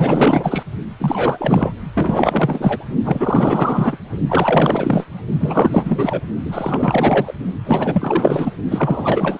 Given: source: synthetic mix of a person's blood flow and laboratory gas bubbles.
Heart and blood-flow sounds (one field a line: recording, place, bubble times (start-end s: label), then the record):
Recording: Doppler ultrasound of blood flow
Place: precordium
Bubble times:
0.00-0.63 s: bubbles
0.99-1.72 s: bubbles
1.94-2.85 s: bubbles
3.04-3.98 s: bubbles
4.29-5.06 s: bubbles
5.40-6.20 s: bubbles
6.45-7.33 s: bubbles
7.65-8.52 s: bubbles
8.71-9.38 s: bubbles
From the record:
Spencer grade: 4 (maximum detectable bubble signal sounding continuously throughout systole and diastole of every cardiac period, and overriding the amplitude of the normal cardiac signals)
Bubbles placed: only in the low amplitude regions of the cardiac cycle